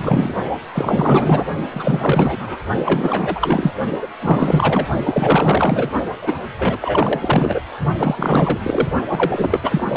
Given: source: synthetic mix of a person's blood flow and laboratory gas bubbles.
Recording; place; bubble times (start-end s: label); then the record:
Doppler ultrasound of blood flow; precordium
0.00-0.34 s: bubbles
0.73-1.46 s: bubbles
1.70-2.58 s: bubbles
2.84-3.73 s: bubbles
4.01-4.08 s: bubbles
4.23-4.88 s: bubbles
5.05-5.91 s: bubbles
6.22-6.33 s: bubbles
6.57-6.78 s: bubbles
6.81-7.60 s: bubbles
7.98-8.60 s: bubbles
8.63-8.88 s: bubbles
9.09-9.60 s: bubbles
9.62-9.85 s: bubbles
9.90-9.97 s: bubbles
From the record:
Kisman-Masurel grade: 444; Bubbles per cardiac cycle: continuous sound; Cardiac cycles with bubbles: 100%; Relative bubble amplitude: maximal (0.775 to 0.999); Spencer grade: 4 (maximum detectable bubble signal sounding continuously throughout systole and diastole of every cardiac period, and overriding the amplitude of the normal cardiac signals); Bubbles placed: only in the low amplitude regions of the cardiac cycle